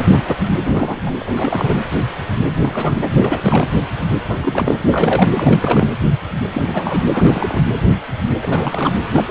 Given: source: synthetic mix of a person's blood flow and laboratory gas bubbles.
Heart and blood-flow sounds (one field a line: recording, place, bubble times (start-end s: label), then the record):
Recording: Doppler ultrasound of blood flow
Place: precordium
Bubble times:
0.65-0.99 s: bubbles
1.06-1.11 s: bubbles
1.21-1.77 s: bubbles
2.56-3.08 s: bubbles
3.12-3.68 s: bubbles
4.27-4.37 s: bubbles
4.40-5.30 s: bubbles
5.35-5.87 s: bubbles
6.54-6.63 s: bubbles
6.66-7.04 s: bubbles
7.13-7.68 s: bubbles
8.42-8.93 s: bubbles
9.12-9.24 s: bubbles
9.28-9.31 s: bubbles
From the record:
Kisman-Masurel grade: 332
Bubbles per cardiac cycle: rolling drumbeat, 9 or more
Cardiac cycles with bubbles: 50 to 99%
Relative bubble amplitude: moderate (0.250 to 0.450)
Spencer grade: 3 (all of the cardiac periods contain showers or single bubble signals, but not dominating or overriding the cardiac motion signals)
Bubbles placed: anywhere in the cardiac cycle